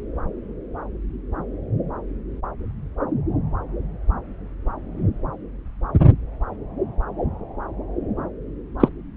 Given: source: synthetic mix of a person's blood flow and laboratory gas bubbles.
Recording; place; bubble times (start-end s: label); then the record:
Doppler ultrasound of blood flow; subclavian vein
8.80-8.88 s: bubbles
From the record:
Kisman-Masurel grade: 113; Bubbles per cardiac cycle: 1 to 2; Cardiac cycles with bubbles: 1 to 10%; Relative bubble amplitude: loud (0.450 to 0.775); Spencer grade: 1 (occasional bubble signal discernible with the cardiac motion signal, with majority of cardiac periods free of bubbles); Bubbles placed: anywhere in the cardiac cycle